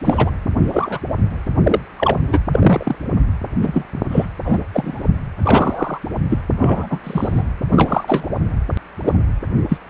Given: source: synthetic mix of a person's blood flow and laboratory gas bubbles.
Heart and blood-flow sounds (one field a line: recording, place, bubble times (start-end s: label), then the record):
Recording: Doppler ultrasound of blood flow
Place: precordium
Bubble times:
0.04-0.31 s: bubbles
0.72-0.99 s: bubbles
1.62-1.80 s: bubbles
1.98-2.19 s: bubbles
2.27-2.38 s: bubbles
2.52-2.96 s: bubbles
3.62-3.85 s: bubbles
4.10-4.26 s: bubbles
4.44-4.58 s: bubbles
4.73-5.09 s: bubbles
5.44-5.99 s: bubbles
6.29-6.38 s: bubbles
6.60-6.87 s: bubbles
6.90-7.00 s: bubbles
7.04-7.43 s: bubbles
7.70-8.29 s: bubbles
9.05-9.12 s: bubbles
9.69-9.78 s: bubbles
From the record:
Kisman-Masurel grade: 243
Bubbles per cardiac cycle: several, 3 to 8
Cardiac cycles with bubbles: 100%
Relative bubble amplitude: loud (0.450 to 0.775)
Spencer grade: 3 (all of the cardiac periods contain showers or single bubble signals, but not dominating or overriding the cardiac motion signals)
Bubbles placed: anywhere in the cardiac cycle